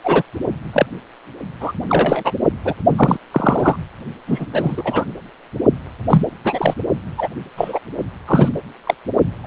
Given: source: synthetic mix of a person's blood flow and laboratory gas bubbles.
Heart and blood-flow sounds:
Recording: Doppler ultrasound of blood flow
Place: precordium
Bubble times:
0.04-0.23 s: bubbles
0.73-0.86 s: bubbles
1.60-1.72 s: bubbles
1.89-2.33 s: bubbles
2.65-2.74 s: bubbles
2.96-3.17 s: bubbles
3.31-3.76 s: bubbles
4.27-4.46 s: bubbles
4.53-5.06 s: bubbles
6.09-6.22 s: bubbles
6.44-6.75 s: bubbles
7.17-7.29 s: bubbles
7.57-7.80 s: bubbles
8.27-8.48 s: bubbles
8.85-8.94 s: bubbles
9.43-9.46 s: bubbles
From the record:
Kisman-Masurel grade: 243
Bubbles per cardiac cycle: several, 3 to 8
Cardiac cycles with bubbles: 100%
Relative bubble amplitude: loud (0.450 to 0.775)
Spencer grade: 3 (all of the cardiac periods contain showers or single bubble signals, but not dominating or overriding the cardiac motion signals)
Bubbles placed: only in the low amplitude regions of the cardiac cycle

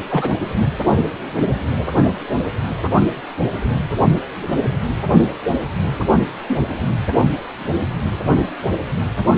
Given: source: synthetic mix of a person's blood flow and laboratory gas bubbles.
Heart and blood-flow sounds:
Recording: Doppler ultrasound of blood flow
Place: precordium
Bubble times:
0.10-0.36 s: bubbles
6.48-6.62 s: bubbles
From the record:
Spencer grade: 2 (many but less than half of the cardiac periods contain bubble signals, singularly or in groups)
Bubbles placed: anywhere in the cardiac cycle

